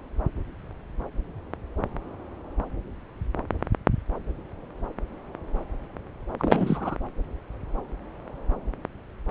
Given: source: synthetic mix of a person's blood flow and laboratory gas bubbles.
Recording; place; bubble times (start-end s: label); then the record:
Doppler ultrasound of blood flow; subclavian vein
6.39-6.97 s: bubbles
From the record:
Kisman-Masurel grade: 211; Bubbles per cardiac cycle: several, 3 to 8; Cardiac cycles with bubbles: 1 to 10%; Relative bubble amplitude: barely perceptible (0.100 to 0.250); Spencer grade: 1 (occasional bubble signal discernible with the cardiac motion signal, with majority of cardiac periods free of bubbles); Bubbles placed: anywhere in the cardiac cycle